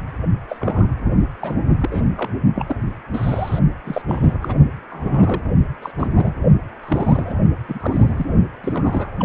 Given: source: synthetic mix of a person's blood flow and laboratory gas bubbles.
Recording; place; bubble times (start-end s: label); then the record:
Doppler ultrasound of blood flow; precordium
0.48-0.86 s: bubbles
1.41-1.55 s: bubbles
1.79-2.08 s: bubbles
2.17-2.31 s: bubbles
2.55-2.77 s: bubbles
3.14-3.60 s: bubbles
3.85-4.02 s: bubbles
4.08-4.37 s: bubbles
4.41-4.57 s: bubbles
4.89-5.41 s: bubbles
5.82-5.92 s: bubbles
5.98-6.07 s: bubbles
6.13-6.34 s: bubbles
6.83-7.37 s: bubbles
7.68-8.31 s: bubbles
8.63-9.11 s: bubbles
9.19-9.25 s: bubbles
From the record:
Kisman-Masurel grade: 242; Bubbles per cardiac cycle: several, 3 to 8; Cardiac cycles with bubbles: 100%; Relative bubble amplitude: moderate (0.250 to 0.450); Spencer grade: 3 (all of the cardiac periods contain showers or single bubble signals, but not dominating or overriding the cardiac motion signals); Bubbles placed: only in the low amplitude regions of the cardiac cycle